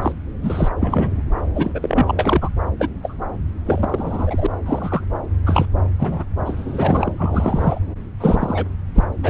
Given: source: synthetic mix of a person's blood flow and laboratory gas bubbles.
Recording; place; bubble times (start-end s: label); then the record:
Doppler ultrasound of blood flow; subclavian vein
0.02-0.12 s: bubbles
0.41-0.69 s: bubbles
0.81-1.22 s: bubbles
1.55-1.71 s: bubbles
1.74-2.13 s: bubbles
2.19-2.50 s: bubbles
2.79-2.88 s: bubbles
3.02-3.16 s: bubbles
3.66-4.46 s: bubbles
4.65-5.02 s: bubbles
5.46-5.65 s: bubbles
5.99-6.24 s: bubbles
6.45-7.11 s: bubbles
7.18-7.80 s: bubbles
8.20-8.65 s: bubbles
8.95-9.04 s: bubbles
9.23-9.30 s: bubbles
From the record:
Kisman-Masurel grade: 233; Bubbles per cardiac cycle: several, 3 to 8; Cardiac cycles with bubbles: 50 to 99%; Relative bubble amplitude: loud (0.450 to 0.775); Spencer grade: 3 (all of the cardiac periods contain showers or single bubble signals, but not dominating or overriding the cardiac motion signals); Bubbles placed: anywhere in the cardiac cycle